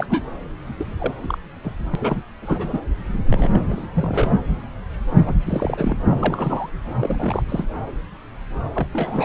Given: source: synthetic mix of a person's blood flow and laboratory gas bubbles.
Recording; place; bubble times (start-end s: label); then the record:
Doppler ultrasound of blood flow; subclavian vein
0.00-0.06 s: bubbles
0.10-0.23 s: bubbles
0.78-0.87 s: bubbles
0.98-1.13 s: bubbles
1.23-1.38 s: bubbles
1.63-1.72 s: bubbles
1.90-1.96 s: bubbles
2.00-2.17 s: bubbles
2.42-2.80 s: bubbles
3.26-3.48 s: bubbles
3.51-3.87 s: bubbles
3.96-4.39 s: bubbles
5.25-5.35 s: bubbles
5.46-5.98 s: bubbles
6.08-6.69 s: bubbles
7.00-7.42 s: bubbles
7.49-7.65 s: bubbles
8.74-8.87 s: bubbles
8.93-9.25 s: bubbles
From the record:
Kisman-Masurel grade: 332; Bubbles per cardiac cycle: rolling drumbeat, 9 or more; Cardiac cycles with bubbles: 50 to 99%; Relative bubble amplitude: moderate (0.250 to 0.450); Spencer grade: 3 (all of the cardiac periods contain showers or single bubble signals, but not dominating or overriding the cardiac motion signals); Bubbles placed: anywhere in the cardiac cycle